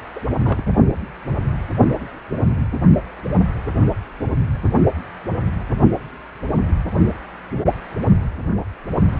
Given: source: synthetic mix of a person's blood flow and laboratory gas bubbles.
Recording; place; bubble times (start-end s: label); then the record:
Doppler ultrasound of blood flow; precordium
0.15-0.20 s: bubbles
0.35-0.62 s: bubbles
From the record:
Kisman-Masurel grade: 122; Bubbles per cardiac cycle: 1 to 2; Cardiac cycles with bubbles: 10 to 50%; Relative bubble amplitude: moderate (0.250 to 0.450); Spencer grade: 2 (many but less than half of the cardiac periods contain bubble signals, singularly or in groups); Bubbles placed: only in the low amplitude regions of the cardiac cycle